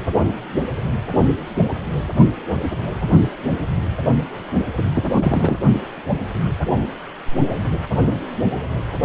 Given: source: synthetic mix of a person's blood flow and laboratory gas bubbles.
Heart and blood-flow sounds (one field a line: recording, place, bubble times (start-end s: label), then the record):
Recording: Doppler ultrasound of blood flow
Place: precordium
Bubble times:
4.77-4.90 s: bubbles
4.92-5.04 s: bubbles
5.12-5.58 s: bubbles
From the record:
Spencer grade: 2 (many but less than half of the cardiac periods contain bubble signals, singularly or in groups)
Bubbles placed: only in the low amplitude regions of the cardiac cycle